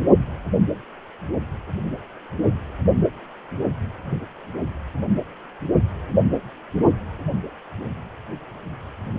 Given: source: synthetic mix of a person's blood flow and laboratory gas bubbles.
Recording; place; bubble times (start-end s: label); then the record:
Doppler ultrasound of blood flow; precordium
no bubbles
From the record:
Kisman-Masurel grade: 000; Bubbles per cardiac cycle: 0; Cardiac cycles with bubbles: 0%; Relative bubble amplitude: no bubbles discernible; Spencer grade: 0 (complete lack of bubble signals)